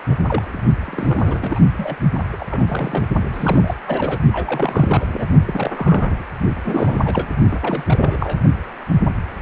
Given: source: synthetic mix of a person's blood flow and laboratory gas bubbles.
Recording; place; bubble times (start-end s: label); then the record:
Doppler ultrasound of blood flow; precordium
0.10-0.15 s: bubbles
0.27-0.61 s: bubbles
0.85-1.59 s: bubbles
1.77-1.96 s: bubbles
2.12-2.23 s: bubbles
2.32-2.37 s: bubbles
2.40-2.45 s: bubbles
2.51-3.08 s: bubbles
3.33-3.75 s: bubbles
3.87-4.21 s: bubbles
4.33-5.26 s: bubbles
5.45-5.73 s: bubbles
5.75-6.24 s: bubbles
6.65-7.29 s: bubbles
7.51-7.59 s: bubbles
7.62-7.84 s: bubbles
7.87-8.40 s: bubbles
From the record:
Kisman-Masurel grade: 332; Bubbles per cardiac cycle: rolling drumbeat, 9 or more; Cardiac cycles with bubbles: 50 to 99%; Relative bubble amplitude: moderate (0.250 to 0.450); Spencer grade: 3 (all of the cardiac periods contain showers or single bubble signals, but not dominating or overriding the cardiac motion signals); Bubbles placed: only in the low amplitude regions of the cardiac cycle